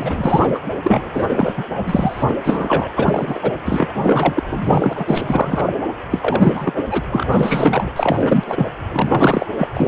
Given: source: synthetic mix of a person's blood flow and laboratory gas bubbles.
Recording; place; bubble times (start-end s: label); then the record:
Doppler ultrasound of blood flow; precordium
0.00-0.59 s: bubbles
0.83-1.65 s: bubbles
1.77-2.25 s: bubbles
2.29-2.35 s: bubbles
2.44-2.92 s: bubbles
2.96-3.52 s: bubbles
3.65-3.88 s: bubbles
4.02-4.43 s: bubbles
4.46-5.73 s: bubbles
6.11-6.85 s: bubbles
6.91-7.02 s: bubbles
7.11-7.27 s: bubbles
7.33-7.92 s: bubbles
7.96-8.66 s: bubbles
8.92-9.46 s: bubbles
9.59-9.68 s: bubbles
9.74-9.88 s: bubbles
From the record:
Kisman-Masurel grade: 444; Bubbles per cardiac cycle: continuous sound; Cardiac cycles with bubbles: 100%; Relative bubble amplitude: maximal (0.775 to 0.999); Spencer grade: 4 (maximum detectable bubble signal sounding continuously throughout systole and diastole of every cardiac period, and overriding the amplitude of the normal cardiac signals); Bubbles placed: anywhere in the cardiac cycle